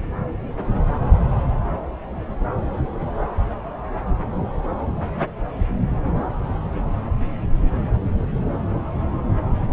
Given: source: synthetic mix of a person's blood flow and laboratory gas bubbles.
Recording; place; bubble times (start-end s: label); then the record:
Doppler ultrasound of blood flow; subclavian vein
no bubbles
From the record:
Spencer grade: 0 (complete lack of bubble signals)